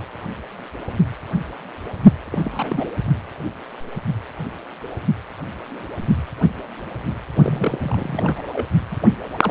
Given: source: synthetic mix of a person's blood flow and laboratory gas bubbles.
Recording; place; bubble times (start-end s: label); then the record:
Doppler ultrasound of blood flow; precordium
2.31-2.91 s: bubbles
3.06-3.12 s: bubbles
7.43-7.78 s: bubbles
7.83-8.41 s: bubbles
8.52-8.66 s: bubbles
8.91-8.94 s: bubbles
9.01-9.08 s: bubbles
9.42-9.51 s: bubbles
From the record:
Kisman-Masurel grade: 221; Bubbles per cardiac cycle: several, 3 to 8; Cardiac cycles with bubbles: 10 to 50%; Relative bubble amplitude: barely perceptible (0.100 to 0.250); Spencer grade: 2 (many but less than half of the cardiac periods contain bubble signals, singularly or in groups); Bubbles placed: anywhere in the cardiac cycle